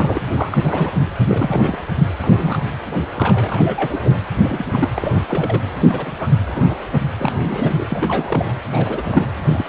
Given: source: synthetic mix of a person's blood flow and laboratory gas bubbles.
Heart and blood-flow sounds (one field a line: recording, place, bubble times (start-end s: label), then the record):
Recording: Doppler ultrasound of blood flow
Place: precordium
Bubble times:
0.00-0.20 s: bubbles
0.35-0.58 s: bubbles
0.61-0.91 s: bubbles
1.28-1.76 s: bubbles
2.22-2.64 s: bubbles
3.15-4.21 s: bubbles
4.43-4.88 s: bubbles
4.96-5.62 s: bubbles
5.88-6.16 s: bubbles
6.19-6.28 s: bubbles
6.45-6.88 s: bubbles
6.91-7.01 s: bubbles
7.17-7.87 s: bubbles
7.89-8.54 s: bubbles
8.71-9.27 s: bubbles
9.47-9.65 s: bubbles
From the record:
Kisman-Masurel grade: 242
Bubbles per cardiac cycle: several, 3 to 8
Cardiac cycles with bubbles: 100%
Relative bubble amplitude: moderate (0.250 to 0.450)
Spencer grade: 3 (all of the cardiac periods contain showers or single bubble signals, but not dominating or overriding the cardiac motion signals)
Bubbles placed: anywhere in the cardiac cycle